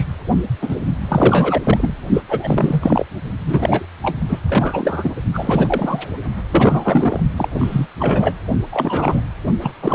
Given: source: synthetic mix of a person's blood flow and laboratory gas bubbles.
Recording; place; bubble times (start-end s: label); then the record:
Doppler ultrasound of blood flow; precordium
0.00-0.04 s: bubbles
0.61-0.76 s: bubbles
1.08-1.61 s: bubbles
1.64-1.93 s: bubbles
2.13-2.22 s: bubbles
2.28-3.05 s: bubbles
3.46-3.85 s: bubbles
4.02-4.17 s: bubbles
4.29-4.39 s: bubbles
4.48-5.14 s: bubbles
5.33-6.03 s: bubbles
6.51-7.20 s: bubbles
7.37-7.49 s: bubbles
7.54-7.87 s: bubbles
7.99-8.33 s: bubbles
8.72-9.21 s: bubbles
9.61-9.71 s: bubbles
9.81-9.95 s: bubbles
From the record:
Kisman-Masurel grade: 343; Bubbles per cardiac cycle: rolling drumbeat, 9 or more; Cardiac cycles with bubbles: 100%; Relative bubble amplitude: loud (0.450 to 0.775); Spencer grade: 3 (all of the cardiac periods contain showers or single bubble signals, but not dominating or overriding the cardiac motion signals); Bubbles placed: only in the low amplitude regions of the cardiac cycle